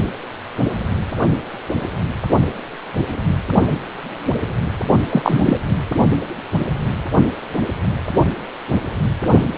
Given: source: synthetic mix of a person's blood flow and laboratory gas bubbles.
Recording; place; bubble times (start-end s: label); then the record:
Doppler ultrasound of blood flow; precordium
5.09-5.58 s: bubbles
From the record:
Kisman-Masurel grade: 213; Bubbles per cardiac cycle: several, 3 to 8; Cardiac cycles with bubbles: 1 to 10%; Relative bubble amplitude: loud (0.450 to 0.775); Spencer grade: 1 (occasional bubble signal discernible with the cardiac motion signal, with majority of cardiac periods free of bubbles); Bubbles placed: only in the low amplitude regions of the cardiac cycle